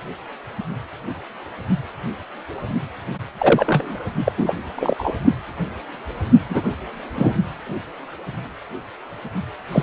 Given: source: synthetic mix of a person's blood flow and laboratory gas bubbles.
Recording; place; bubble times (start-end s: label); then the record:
Doppler ultrasound of blood flow; precordium
3.38-4.03 s: bubbles
4.24-4.32 s: bubbles
4.38-4.56 s: bubbles
4.76-5.12 s: bubbles
6.49-6.62 s: bubbles
7.16-7.36 s: bubbles
9.71-9.82 s: bubbles
From the record:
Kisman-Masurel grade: 223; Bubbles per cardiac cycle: several, 3 to 8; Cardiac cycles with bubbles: 10 to 50%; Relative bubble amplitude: loud (0.450 to 0.775); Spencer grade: 2 (many but less than half of the cardiac periods contain bubble signals, singularly or in groups); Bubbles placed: only in the low amplitude regions of the cardiac cycle